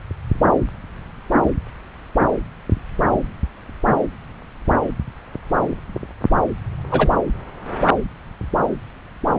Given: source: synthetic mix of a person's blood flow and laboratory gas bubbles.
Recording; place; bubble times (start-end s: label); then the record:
Doppler ultrasound of blood flow; subclavian vein
6.91-7.09 s: bubbles
From the record:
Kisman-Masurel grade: 113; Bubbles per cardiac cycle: 1 to 2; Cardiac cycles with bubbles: 1 to 10%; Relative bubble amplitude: loud (0.450 to 0.775); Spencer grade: 1 (occasional bubble signal discernible with the cardiac motion signal, with majority of cardiac periods free of bubbles); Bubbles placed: anywhere in the cardiac cycle